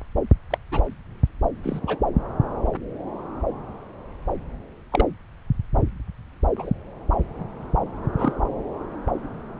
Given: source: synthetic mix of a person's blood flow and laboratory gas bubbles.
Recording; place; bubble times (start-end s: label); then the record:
Doppler ultrasound of blood flow; subclavian vein
0.50-0.58 s: bubbles
0.71-0.82 s: bubbles
1.63-1.80 s: bubbles
1.87-1.98 s: bubbles
4.92-5.06 s: bubbles
6.56-6.71 s: bubbles
8.18-8.33 s: bubbles
From the record:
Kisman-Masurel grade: 122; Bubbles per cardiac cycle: 1 to 2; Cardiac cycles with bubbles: 10 to 50%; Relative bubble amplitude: moderate (0.250 to 0.450); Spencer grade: 2 (many but less than half of the cardiac periods contain bubble signals, singularly or in groups); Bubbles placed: anywhere in the cardiac cycle